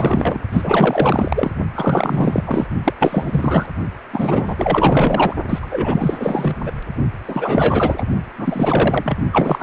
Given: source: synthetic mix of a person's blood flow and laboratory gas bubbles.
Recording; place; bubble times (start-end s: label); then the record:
Doppler ultrasound of blood flow; precordium
0.00-0.42 s: bubbles
0.53-1.51 s: bubbles
1.74-2.67 s: bubbles
2.84-2.94 s: bubbles
2.99-3.68 s: bubbles
4.12-4.55 s: bubbles
4.58-5.34 s: bubbles
5.49-5.59 s: bubbles
5.62-6.55 s: bubbles
6.65-6.73 s: bubbles
7.27-8.03 s: bubbles
8.38-9.18 s: bubbles
9.32-9.63 s: bubbles
From the record:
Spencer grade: 4 (maximum detectable bubble signal sounding continuously throughout systole and diastole of every cardiac period, and overriding the amplitude of the normal cardiac signals); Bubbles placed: only in the low amplitude regions of the cardiac cycle